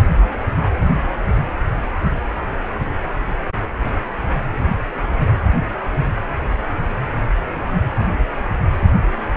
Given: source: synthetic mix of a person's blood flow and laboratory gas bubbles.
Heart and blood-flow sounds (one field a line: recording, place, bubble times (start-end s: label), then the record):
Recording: Doppler ultrasound of blood flow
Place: precordium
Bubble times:
no bubbles
From the record:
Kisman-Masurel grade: 000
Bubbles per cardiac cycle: 0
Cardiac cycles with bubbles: 0%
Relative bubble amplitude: no bubbles discernible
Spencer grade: 0 (complete lack of bubble signals)